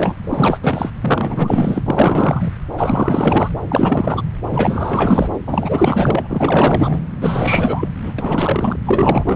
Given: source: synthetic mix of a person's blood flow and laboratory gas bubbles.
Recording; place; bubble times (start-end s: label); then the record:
Doppler ultrasound of blood flow; subclavian vein
0.00-0.14 s: bubbles
0.22-0.90 s: bubbles
1.01-1.83 s: bubbles
1.86-2.52 s: bubbles
2.77-3.49 s: bubbles
3.69-4.22 s: bubbles
4.50-5.39 s: bubbles
5.46-7.00 s: bubbles
7.21-7.88 s: bubbles
8.03-8.13 s: bubbles
8.18-8.76 s: bubbles
8.85-9.36 s: bubbles
From the record:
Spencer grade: 4 (maximum detectable bubble signal sounding continuously throughout systole and diastole of every cardiac period, and overriding the amplitude of the normal cardiac signals); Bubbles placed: anywhere in the cardiac cycle